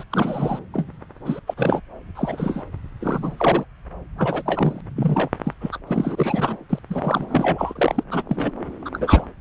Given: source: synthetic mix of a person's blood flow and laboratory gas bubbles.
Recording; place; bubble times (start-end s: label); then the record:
Doppler ultrasound of blood flow; subclavian vein
0.00-0.03 s: bubbles
0.10-0.59 s: bubbles
0.74-0.88 s: bubbles
1.25-1.40 s: bubbles
1.47-1.54 s: bubbles
1.57-1.80 s: bubbles
2.15-2.62 s: bubbles
3.00-3.65 s: bubbles
4.17-4.42 s: bubbles
4.46-4.80 s: bubbles
4.95-5.29 s: bubbles
5.43-5.54 s: bubbles
5.61-5.79 s: bubbles
5.87-6.57 s: bubbles
6.69-6.79 s: bubbles
6.90-8.04 s: bubbles
8.11-8.23 s: bubbles
8.29-8.51 s: bubbles
8.85-8.90 s: bubbles
8.93-9.34 s: bubbles
From the record:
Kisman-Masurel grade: 242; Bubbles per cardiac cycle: several, 3 to 8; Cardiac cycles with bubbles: 100%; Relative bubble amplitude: moderate (0.250 to 0.450); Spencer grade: 3 (all of the cardiac periods contain showers or single bubble signals, but not dominating or overriding the cardiac motion signals); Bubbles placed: anywhere in the cardiac cycle